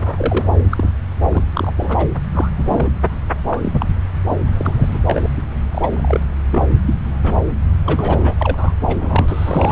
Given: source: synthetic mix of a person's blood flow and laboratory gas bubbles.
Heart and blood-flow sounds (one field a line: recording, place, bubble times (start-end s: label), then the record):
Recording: Doppler ultrasound of blood flow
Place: subclavian vein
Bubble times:
0.00-0.46 s: bubbles
0.70-0.90 s: bubbles
1.31-1.42 s: bubbles
1.54-1.72 s: bubbles
1.76-2.09 s: bubbles
2.31-2.49 s: bubbles
2.56-2.90 s: bubbles
3.49-3.86 s: bubbles
4.29-4.36 s: bubbles
4.53-5.00 s: bubbles
5.06-5.28 s: bubbles
5.37-5.42 s: bubbles
5.71-6.20 s: bubbles
6.50-6.66 s: bubbles
6.86-6.95 s: bubbles
7.23-7.40 s: bubbles
7.85-8.34 s: bubbles
8.38-8.73 s: bubbles
8.81-9.72 s: bubbles
From the record:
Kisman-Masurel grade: 242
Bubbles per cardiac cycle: several, 3 to 8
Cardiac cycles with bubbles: 100%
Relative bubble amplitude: moderate (0.250 to 0.450)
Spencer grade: 3 (all of the cardiac periods contain showers or single bubble signals, but not dominating or overriding the cardiac motion signals)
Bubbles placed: anywhere in the cardiac cycle